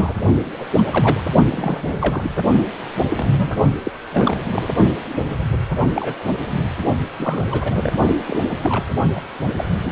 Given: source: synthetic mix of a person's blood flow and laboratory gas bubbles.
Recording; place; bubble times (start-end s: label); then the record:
Doppler ultrasound of blood flow; precordium
0.00-0.16 s: bubbles
0.57-0.66 s: bubbles
0.78-0.82 s: bubbles
0.91-1.21 s: bubbles
1.50-2.31 s: bubbles
3.09-3.57 s: bubbles
3.83-3.91 s: bubbles
4.12-4.44 s: bubbles
4.51-4.74 s: bubbles
5.51-5.58 s: bubbles
5.94-6.14 s: bubbles
7.18-7.93 s: bubbles
8.27-8.40 s: bubbles
8.62-8.85 s: bubbles
9.15-9.21 s: bubbles
9.56-9.65 s: bubbles
9.83-9.92 s: bubbles
From the record:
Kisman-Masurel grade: 242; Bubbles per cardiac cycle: several, 3 to 8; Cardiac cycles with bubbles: 100%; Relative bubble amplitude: moderate (0.250 to 0.450); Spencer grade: 3 (all of the cardiac periods contain showers or single bubble signals, but not dominating or overriding the cardiac motion signals); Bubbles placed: only in the low amplitude regions of the cardiac cycle